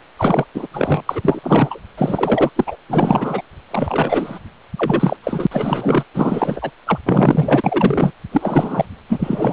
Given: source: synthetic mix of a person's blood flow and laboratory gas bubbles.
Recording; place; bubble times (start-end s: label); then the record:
Doppler ultrasound of blood flow; precordium
0.18-0.45 s: bubbles
0.54-0.67 s: bubbles
0.73-1.02 s: bubbles
1.09-1.79 s: bubbles
1.98-2.50 s: bubbles
2.56-2.76 s: bubbles
2.88-3.42 s: bubbles
3.70-4.39 s: bubbles
4.77-5.17 s: bubbles
5.24-5.47 s: bubbles
5.51-6.04 s: bubbles
6.14-6.71 s: bubbles
6.86-6.99 s: bubbles
7.06-8.11 s: bubbles
8.32-8.85 s: bubbles
9.09-9.53 s: bubbles
From the record:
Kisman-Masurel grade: 343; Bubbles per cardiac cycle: rolling drumbeat, 9 or more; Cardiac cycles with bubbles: 100%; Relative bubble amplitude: loud (0.450 to 0.775); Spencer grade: 3 (all of the cardiac periods contain showers or single bubble signals, but not dominating or overriding the cardiac motion signals); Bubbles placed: anywhere in the cardiac cycle